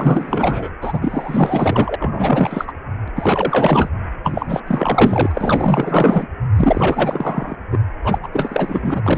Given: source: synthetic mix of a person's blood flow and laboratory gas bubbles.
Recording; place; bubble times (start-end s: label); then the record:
Doppler ultrasound of blood flow; precordium
0.00-0.69 s: bubbles
0.81-1.95 s: bubbles
1.99-2.72 s: bubbles
3.08-3.10 s: bubbles
3.15-3.89 s: bubbles
4.23-4.60 s: bubbles
4.67-6.28 s: bubbles
6.56-7.55 s: bubbles
7.71-7.78 s: bubbles
8.04-8.19 s: bubbles
8.23-8.28 s: bubbles
8.32-9.18 s: bubbles
From the record:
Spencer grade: 4 (maximum detectable bubble signal sounding continuously throughout systole and diastole of every cardiac period, and overriding the amplitude of the normal cardiac signals); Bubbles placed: anywhere in the cardiac cycle